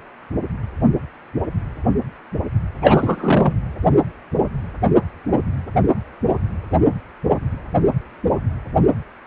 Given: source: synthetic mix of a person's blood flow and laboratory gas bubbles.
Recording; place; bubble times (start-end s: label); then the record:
Doppler ultrasound of blood flow; precordium
2.81-3.54 s: bubbles
From the record:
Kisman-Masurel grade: 213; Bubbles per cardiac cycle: several, 3 to 8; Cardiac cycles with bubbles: 1 to 10%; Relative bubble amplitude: loud (0.450 to 0.775); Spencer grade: 1 (occasional bubble signal discernible with the cardiac motion signal, with majority of cardiac periods free of bubbles); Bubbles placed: anywhere in the cardiac cycle